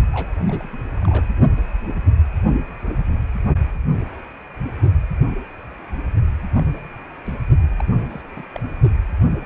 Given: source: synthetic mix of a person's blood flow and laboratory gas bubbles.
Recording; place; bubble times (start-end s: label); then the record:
Doppler ultrasound of blood flow; precordium
0.12-0.35 s: bubbles
0.47-0.68 s: bubbles
0.96-1.25 s: bubbles
6.54-6.81 s: bubbles
7.27-7.34 s: bubbles
7.80-7.82 s: bubbles
8.10-8.21 s: bubbles
8.36-8.42 s: bubbles
8.54-8.60 s: bubbles
From the record:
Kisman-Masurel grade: 221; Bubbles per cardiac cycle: several, 3 to 8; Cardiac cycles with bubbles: 10 to 50%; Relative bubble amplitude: barely perceptible (0.100 to 0.250); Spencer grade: 2 (many but less than half of the cardiac periods contain bubble signals, singularly or in groups); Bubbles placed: only in the low amplitude regions of the cardiac cycle